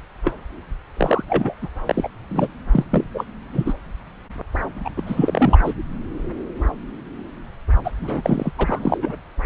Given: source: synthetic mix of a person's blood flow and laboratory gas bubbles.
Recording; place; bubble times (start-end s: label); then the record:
Doppler ultrasound of blood flow; subclavian vein
0.25-0.33 s: bubbles
0.94-1.25 s: bubbles
1.28-1.54 s: bubbles
1.62-1.69 s: bubbles
1.85-2.09 s: bubbles
2.30-2.48 s: bubbles
2.72-2.85 s: bubbles
2.91-3.04 s: bubbles
3.14-3.25 s: bubbles
3.52-3.74 s: bubbles
4.84-4.90 s: bubbles
4.96-5.58 s: bubbles
5.64-5.75 s: bubbles
7.84-7.92 s: bubbles
8.01-8.51 s: bubbles
8.58-8.97 s: bubbles
9.02-9.15 s: bubbles
From the record:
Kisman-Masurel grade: 333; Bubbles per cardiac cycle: rolling drumbeat, 9 or more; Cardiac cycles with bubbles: 50 to 99%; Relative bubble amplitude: loud (0.450 to 0.775); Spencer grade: 3 (all of the cardiac periods contain showers or single bubble signals, but not dominating or overriding the cardiac motion signals); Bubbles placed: anywhere in the cardiac cycle